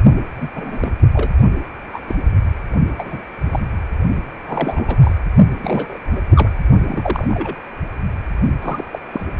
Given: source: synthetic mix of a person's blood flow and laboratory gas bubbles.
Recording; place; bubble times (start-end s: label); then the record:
Doppler ultrasound of blood flow; precordium
0.36-0.48 s: bubbles
0.55-0.94 s: bubbles
1.12-1.32 s: bubbles
1.93-2.00 s: bubbles
2.08-2.16 s: bubbles
2.97-3.18 s: bubbles
3.50-3.59 s: bubbles
4.46-4.97 s: bubbles
5.01-5.19 s: bubbles
5.62-5.98 s: bubbles
6.16-6.22 s: bubbles
6.33-6.49 s: bubbles
6.87-7.55 s: bubbles
8.62-8.84 s: bubbles
8.93-8.99 s: bubbles
9.12-9.26 s: bubbles
From the record:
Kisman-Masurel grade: 242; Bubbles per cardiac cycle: several, 3 to 8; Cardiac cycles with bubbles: 100%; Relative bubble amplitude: moderate (0.250 to 0.450); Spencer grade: 3 (all of the cardiac periods contain showers or single bubble signals, but not dominating or overriding the cardiac motion signals); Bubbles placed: only in the low amplitude regions of the cardiac cycle